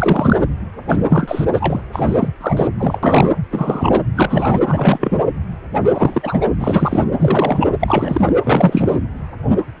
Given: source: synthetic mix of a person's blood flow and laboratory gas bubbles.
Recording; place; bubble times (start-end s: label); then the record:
Doppler ultrasound of blood flow; precordium
0.00-0.37 s: bubbles
0.89-1.45 s: bubbles
1.53-1.83 s: bubbles
1.93-2.29 s: bubbles
2.41-2.68 s: bubbles
2.78-3.00 s: bubbles
3.03-3.31 s: bubbles
3.50-4.01 s: bubbles
4.15-4.59 s: bubbles
4.66-5.21 s: bubbles
5.94-6.38 s: bubbles
6.41-6.46 s: bubbles
6.59-7.04 s: bubbles
7.20-7.73 s: bubbles
7.80-8.32 s: bubbles
8.43-8.99 s: bubbles
From the record:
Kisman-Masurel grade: 333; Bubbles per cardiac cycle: rolling drumbeat, 9 or more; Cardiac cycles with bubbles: 50 to 99%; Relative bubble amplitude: loud (0.450 to 0.775); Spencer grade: 3 (all of the cardiac periods contain showers or single bubble signals, but not dominating or overriding the cardiac motion signals); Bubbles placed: anywhere in the cardiac cycle